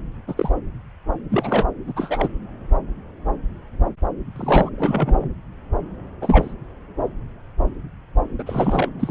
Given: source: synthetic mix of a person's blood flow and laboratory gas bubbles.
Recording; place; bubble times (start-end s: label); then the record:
Doppler ultrasound of blood flow; subclavian vein
0.27-0.50 s: bubbles
1.30-1.65 s: bubbles
1.86-1.93 s: bubbles
1.96-2.28 s: bubbles
4.36-4.70 s: bubbles
4.77-5.29 s: bubbles
6.21-6.54 s: bubbles
8.38-8.88 s: bubbles
8.99-9.11 s: bubbles
From the record:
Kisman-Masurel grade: 233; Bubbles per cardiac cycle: several, 3 to 8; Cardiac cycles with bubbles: 50 to 99%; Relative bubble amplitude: loud (0.450 to 0.775); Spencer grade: 3 (all of the cardiac periods contain showers or single bubble signals, but not dominating or overriding the cardiac motion signals); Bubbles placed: anywhere in the cardiac cycle